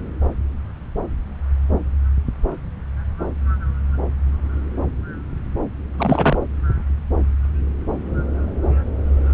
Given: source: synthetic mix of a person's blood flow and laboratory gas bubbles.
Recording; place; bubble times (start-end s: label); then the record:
Doppler ultrasound of blood flow; subclavian vein
5.97-6.38 s: bubbles
From the record:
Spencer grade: 1 (occasional bubble signal discernible with the cardiac motion signal, with majority of cardiac periods free of bubbles); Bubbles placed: anywhere in the cardiac cycle